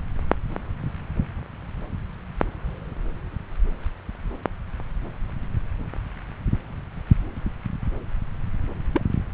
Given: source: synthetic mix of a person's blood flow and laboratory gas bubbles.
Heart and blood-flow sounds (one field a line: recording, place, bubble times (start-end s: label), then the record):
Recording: Doppler ultrasound of blood flow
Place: subclavian vein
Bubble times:
8.94-9.02 s: bubbles
From the record:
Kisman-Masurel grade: 121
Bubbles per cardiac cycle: 1 to 2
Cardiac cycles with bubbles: 10 to 50%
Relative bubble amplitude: barely perceptible (0.100 to 0.250)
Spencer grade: 2 (many but less than half of the cardiac periods contain bubble signals, singularly or in groups)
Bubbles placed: anywhere in the cardiac cycle